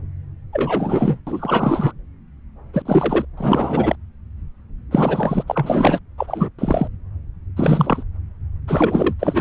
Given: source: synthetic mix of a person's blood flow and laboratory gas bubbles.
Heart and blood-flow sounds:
Doppler ultrasound of blood flow; subclavian vein
0.52-1.20 s: bubbles
1.27-1.93 s: bubbles
2.73-2.82 s: bubbles
2.85-3.25 s: bubbles
3.37-3.95 s: bubbles
4.91-5.43 s: bubbles
5.47-5.99 s: bubbles
6.18-6.49 s: bubbles
6.58-6.88 s: bubbles
7.56-8.03 s: bubbles
8.68-9.14 s: bubbles
9.19-9.41 s: bubbles
From the record:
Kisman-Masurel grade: 333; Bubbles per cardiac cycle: rolling drumbeat, 9 or more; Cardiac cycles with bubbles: 50 to 99%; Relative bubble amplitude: loud (0.450 to 0.775); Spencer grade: 3 (all of the cardiac periods contain showers or single bubble signals, but not dominating or overriding the cardiac motion signals); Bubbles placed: anywhere in the cardiac cycle

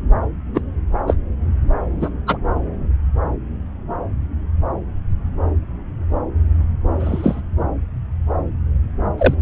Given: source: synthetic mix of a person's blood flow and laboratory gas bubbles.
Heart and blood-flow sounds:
Doppler ultrasound of blood flow; subclavian vein
0.54-0.61 s: bubbles
1.07-1.15 s: bubbles
2.00-2.10 s: bubbles
2.27-2.38 s: bubbles
6.99-7.41 s: bubbles
9.18-9.35 s: bubbles
From the record:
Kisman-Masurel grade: 123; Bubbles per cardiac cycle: 1 to 2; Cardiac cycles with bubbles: 10 to 50%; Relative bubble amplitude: loud (0.450 to 0.775); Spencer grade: 2 (many but less than half of the cardiac periods contain bubble signals, singularly or in groups); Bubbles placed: anywhere in the cardiac cycle

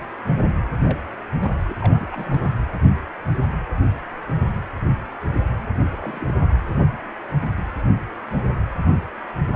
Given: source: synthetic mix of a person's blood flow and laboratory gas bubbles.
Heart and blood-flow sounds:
Doppler ultrasound of blood flow; precordium
0.84-0.98 s: bubbles
1.39-1.52 s: bubbles
1.69-1.73 s: bubbles
1.80-2.06 s: bubbles
2.12-2.53 s: bubbles
5.92-6.37 s: bubbles
6.49-6.53 s: bubbles
From the record:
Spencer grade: 2 (many but less than half of the cardiac periods contain bubble signals, singularly or in groups); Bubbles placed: anywhere in the cardiac cycle

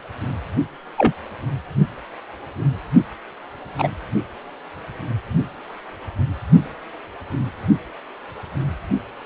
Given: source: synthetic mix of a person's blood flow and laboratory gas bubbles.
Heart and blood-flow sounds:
Doppler ultrasound of blood flow; precordium
0.97-1.12 s: bubbles
3.78-3.89 s: bubbles
From the record:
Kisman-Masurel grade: 123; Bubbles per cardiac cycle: 1 to 2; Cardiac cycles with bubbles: 10 to 50%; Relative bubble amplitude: loud (0.450 to 0.775); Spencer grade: 2 (many but less than half of the cardiac periods contain bubble signals, singularly or in groups); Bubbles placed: only in the low amplitude regions of the cardiac cycle

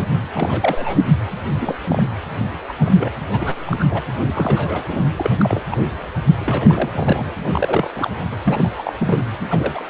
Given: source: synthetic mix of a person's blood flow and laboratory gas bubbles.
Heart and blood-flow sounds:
Doppler ultrasound of blood flow; precordium
0.34-1.02 s: bubbles
1.45-1.77 s: bubbles
1.89-2.04 s: bubbles
2.69-2.74 s: bubbles
2.79-3.10 s: bubbles
3.29-3.55 s: bubbles
3.65-3.77 s: bubbles
3.80-3.85 s: bubbles
3.89-4.03 s: bubbles
4.28-4.83 s: bubbles
4.88-5.02 s: bubbles
5.16-5.30 s: bubbles
5.40-5.65 s: bubbles
5.71-5.77 s: bubbles
6.40-6.90 s: bubbles
6.93-7.31 s: bubbles
7.52-8.10 s: bubbles
8.46-8.70 s: bubbles
8.78-8.93 s: bubbles
8.99-9.23 s: bubbles
9.50-9.86 s: bubbles
From the record:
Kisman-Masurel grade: 242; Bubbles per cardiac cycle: several, 3 to 8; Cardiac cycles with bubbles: 100%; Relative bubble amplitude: moderate (0.250 to 0.450); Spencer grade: 3 (all of the cardiac periods contain showers or single bubble signals, but not dominating or overriding the cardiac motion signals); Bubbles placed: anywhere in the cardiac cycle

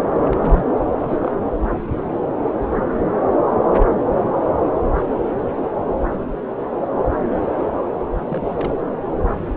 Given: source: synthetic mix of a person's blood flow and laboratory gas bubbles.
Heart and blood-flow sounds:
Doppler ultrasound of blood flow; subclavian vein
0.02-0.66 s: bubbles
0.99-1.20 s: bubbles
1.22-1.31 s: bubbles
8.14-8.46 s: bubbles
8.54-8.74 s: bubbles
From the record:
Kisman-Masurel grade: 221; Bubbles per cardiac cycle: several, 3 to 8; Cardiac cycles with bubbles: 10 to 50%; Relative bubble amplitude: barely perceptible (0.100 to 0.250); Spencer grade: 2 (many but less than half of the cardiac periods contain bubble signals, singularly or in groups); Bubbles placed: anywhere in the cardiac cycle

